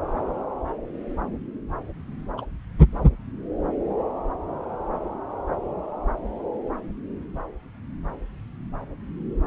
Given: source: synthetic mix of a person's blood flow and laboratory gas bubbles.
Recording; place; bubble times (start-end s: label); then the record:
Doppler ultrasound of blood flow; subclavian vein
2.38-2.46 s: bubbles
From the record:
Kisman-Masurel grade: 112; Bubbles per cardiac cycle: 1 to 2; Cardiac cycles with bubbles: 1 to 10%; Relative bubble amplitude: moderate (0.250 to 0.450); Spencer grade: 1 (occasional bubble signal discernible with the cardiac motion signal, with majority of cardiac periods free of bubbles); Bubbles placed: anywhere in the cardiac cycle